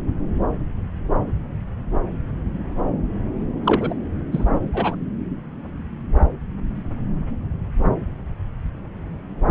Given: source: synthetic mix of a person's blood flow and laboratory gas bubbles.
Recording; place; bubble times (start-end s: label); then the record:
Doppler ultrasound of blood flow; subclavian vein
3.64-3.94 s: bubbles
4.32-4.45 s: bubbles
4.74-4.97 s: bubbles
From the record:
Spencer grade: 1 (occasional bubble signal discernible with the cardiac motion signal, with majority of cardiac periods free of bubbles); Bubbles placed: anywhere in the cardiac cycle